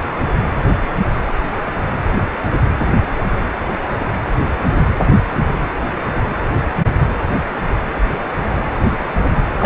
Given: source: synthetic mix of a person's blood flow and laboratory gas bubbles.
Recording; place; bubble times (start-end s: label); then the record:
Doppler ultrasound of blood flow; precordium
9.60-9.66 s: bubbles
From the record:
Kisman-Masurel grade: 213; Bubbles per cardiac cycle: several, 3 to 8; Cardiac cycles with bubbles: 1 to 10%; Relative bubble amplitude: loud (0.450 to 0.775); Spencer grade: 1 (occasional bubble signal discernible with the cardiac motion signal, with majority of cardiac periods free of bubbles); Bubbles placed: anywhere in the cardiac cycle